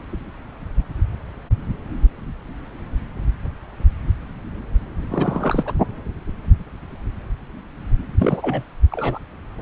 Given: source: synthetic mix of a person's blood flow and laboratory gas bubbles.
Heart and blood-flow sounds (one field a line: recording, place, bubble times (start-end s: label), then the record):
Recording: Doppler ultrasound of blood flow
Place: subclavian vein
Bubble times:
5.10-5.73 s: bubbles
8.19-8.62 s: bubbles
8.92-9.19 s: bubbles
From the record:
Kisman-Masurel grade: 222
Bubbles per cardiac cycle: several, 3 to 8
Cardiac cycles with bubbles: 10 to 50%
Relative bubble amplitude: moderate (0.250 to 0.450)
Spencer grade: 2 (many but less than half of the cardiac periods contain bubble signals, singularly or in groups)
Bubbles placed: anywhere in the cardiac cycle